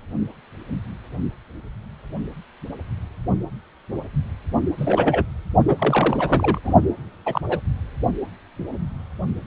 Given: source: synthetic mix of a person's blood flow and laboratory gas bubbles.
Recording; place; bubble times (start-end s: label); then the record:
Doppler ultrasound of blood flow; precordium
4.78-5.25 s: bubbles
5.68-5.76 s: bubbles
5.79-6.60 s: bubbles
6.63-6.72 s: bubbles
7.26-7.41 s: bubbles
7.49-7.59 s: bubbles
From the record:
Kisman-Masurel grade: 233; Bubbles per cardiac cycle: several, 3 to 8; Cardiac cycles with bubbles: 50 to 99%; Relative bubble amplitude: loud (0.450 to 0.775); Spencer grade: 3 (all of the cardiac periods contain showers or single bubble signals, but not dominating or overriding the cardiac motion signals); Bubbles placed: only in the low amplitude regions of the cardiac cycle